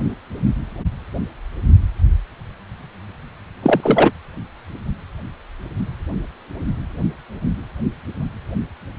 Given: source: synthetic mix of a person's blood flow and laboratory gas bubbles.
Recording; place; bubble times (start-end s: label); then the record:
Doppler ultrasound of blood flow; precordium
3.62-4.12 s: bubbles
From the record:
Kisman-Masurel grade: 213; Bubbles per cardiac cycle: several, 3 to 8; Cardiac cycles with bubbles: 1 to 10%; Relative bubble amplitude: loud (0.450 to 0.775); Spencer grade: 1 (occasional bubble signal discernible with the cardiac motion signal, with majority of cardiac periods free of bubbles); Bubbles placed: anywhere in the cardiac cycle